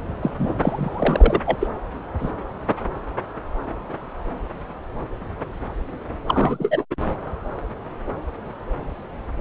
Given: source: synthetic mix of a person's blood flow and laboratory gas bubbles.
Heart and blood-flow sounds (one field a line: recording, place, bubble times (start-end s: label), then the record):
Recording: Doppler ultrasound of blood flow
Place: subclavian vein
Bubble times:
0.21-1.40 s: bubbles
1.46-1.58 s: bubbles
1.61-1.68 s: bubbles
2.20-2.31 s: bubbles
6.27-6.84 s: bubbles
6.90-6.95 s: bubbles
From the record:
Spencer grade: 2 (many but less than half of the cardiac periods contain bubble signals, singularly or in groups)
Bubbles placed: anywhere in the cardiac cycle